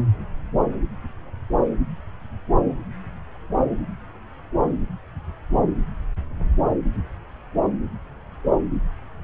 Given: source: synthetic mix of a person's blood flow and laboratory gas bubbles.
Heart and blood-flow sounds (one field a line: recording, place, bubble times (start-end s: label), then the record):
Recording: Doppler ultrasound of blood flow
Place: subclavian vein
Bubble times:
no bubbles
From the record:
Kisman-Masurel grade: 000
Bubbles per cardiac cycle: 0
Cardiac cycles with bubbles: 0%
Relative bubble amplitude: no bubbles discernible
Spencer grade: 0 (complete lack of bubble signals)